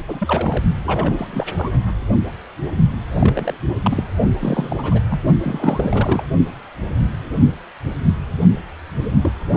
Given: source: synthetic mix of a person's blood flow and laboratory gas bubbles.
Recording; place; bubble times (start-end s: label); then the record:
Doppler ultrasound of blood flow; precordium
0.07-0.64 s: bubbles
0.85-1.46 s: bubbles
1.56-1.71 s: bubbles
3.17-3.57 s: bubbles
3.83-4.03 s: bubbles
4.38-5.01 s: bubbles
5.08-5.20 s: bubbles
5.40-6.25 s: bubbles
9.22-9.32 s: bubbles
9.52-9.57 s: bubbles
From the record:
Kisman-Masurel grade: 332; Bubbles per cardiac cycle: rolling drumbeat, 9 or more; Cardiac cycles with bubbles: 50 to 99%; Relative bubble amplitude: moderate (0.250 to 0.450); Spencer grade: 3 (all of the cardiac periods contain showers or single bubble signals, but not dominating or overriding the cardiac motion signals); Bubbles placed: only in the low amplitude regions of the cardiac cycle